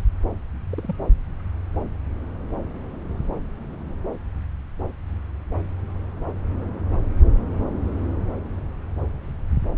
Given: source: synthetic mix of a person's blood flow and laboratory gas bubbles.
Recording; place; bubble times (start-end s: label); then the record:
Doppler ultrasound of blood flow; subclavian vein
0.70-0.95 s: bubbles
From the record:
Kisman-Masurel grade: 111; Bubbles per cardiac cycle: 1 to 2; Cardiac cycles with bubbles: 1 to 10%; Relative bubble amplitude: barely perceptible (0.100 to 0.250); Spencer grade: 1 (occasional bubble signal discernible with the cardiac motion signal, with majority of cardiac periods free of bubbles); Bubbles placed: anywhere in the cardiac cycle